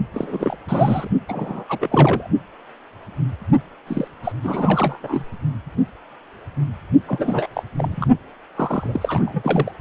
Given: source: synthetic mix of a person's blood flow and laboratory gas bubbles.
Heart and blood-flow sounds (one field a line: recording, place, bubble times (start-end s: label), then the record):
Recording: Doppler ultrasound of blood flow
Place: precordium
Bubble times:
0.14-0.56 s: bubbles
0.69-1.10 s: bubbles
1.28-1.65 s: bubbles
1.69-2.28 s: bubbles
3.87-4.08 s: bubbles
4.24-4.32 s: bubbles
4.43-5.25 s: bubbles
7.08-7.47 s: bubbles
7.53-7.63 s: bubbles
7.77-8.07 s: bubbles
8.55-9.72 s: bubbles
From the record:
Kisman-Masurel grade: 332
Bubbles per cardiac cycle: rolling drumbeat, 9 or more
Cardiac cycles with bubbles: 50 to 99%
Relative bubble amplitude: moderate (0.250 to 0.450)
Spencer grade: 3 (all of the cardiac periods contain showers or single bubble signals, but not dominating or overriding the cardiac motion signals)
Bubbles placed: only in the low amplitude regions of the cardiac cycle